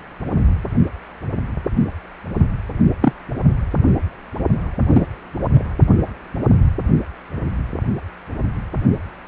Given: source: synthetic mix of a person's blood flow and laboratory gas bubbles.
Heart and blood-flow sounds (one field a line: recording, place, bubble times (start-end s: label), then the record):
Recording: Doppler ultrasound of blood flow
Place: precordium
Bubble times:
3.01-3.13 s: bubbles
4.89-5.06 s: bubbles
5.50-5.64 s: bubbles
From the record:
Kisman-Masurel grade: 123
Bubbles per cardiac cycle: 1 to 2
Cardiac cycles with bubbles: 10 to 50%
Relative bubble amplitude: loud (0.450 to 0.775)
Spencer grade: 2 (many but less than half of the cardiac periods contain bubble signals, singularly or in groups)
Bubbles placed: only in the low amplitude regions of the cardiac cycle